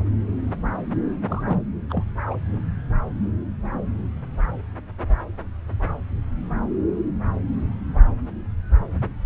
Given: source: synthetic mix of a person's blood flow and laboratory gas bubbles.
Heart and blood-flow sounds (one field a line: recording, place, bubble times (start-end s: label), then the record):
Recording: Doppler ultrasound of blood flow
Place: subclavian vein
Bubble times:
1.28-1.61 s: bubbles
1.90-2.03 s: bubbles
2.30-2.36 s: bubbles
From the record:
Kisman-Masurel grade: 211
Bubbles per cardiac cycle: several, 3 to 8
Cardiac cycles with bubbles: 1 to 10%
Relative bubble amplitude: barely perceptible (0.100 to 0.250)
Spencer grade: 1 (occasional bubble signal discernible with the cardiac motion signal, with majority of cardiac periods free of bubbles)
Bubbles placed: anywhere in the cardiac cycle